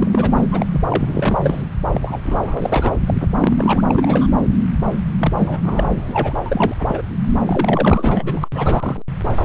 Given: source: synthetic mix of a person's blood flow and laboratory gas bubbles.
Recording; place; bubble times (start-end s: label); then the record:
Doppler ultrasound of blood flow; subclavian vein
0.00-0.41 s: bubbles
0.52-0.66 s: bubbles
0.71-0.82 s: bubbles
0.91-1.37 s: bubbles
1.42-1.62 s: bubbles
1.93-2.19 s: bubbles
2.26-2.99 s: bubbles
3.06-3.14 s: bubbles
3.20-3.26 s: bubbles
3.40-3.82 s: bubbles
3.88-4.27 s: bubbles
5.20-5.33 s: bubbles
5.38-5.87 s: bubbles
5.95-6.34 s: bubbles
6.46-6.75 s: bubbles
6.79-7.01 s: bubbles
7.46-8.48 s: bubbles
8.54-9.02 s: bubbles
From the record:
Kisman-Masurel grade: 342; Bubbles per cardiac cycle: rolling drumbeat, 9 or more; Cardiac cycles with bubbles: 100%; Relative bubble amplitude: moderate (0.250 to 0.450); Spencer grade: 3 (all of the cardiac periods contain showers or single bubble signals, but not dominating or overriding the cardiac motion signals); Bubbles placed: anywhere in the cardiac cycle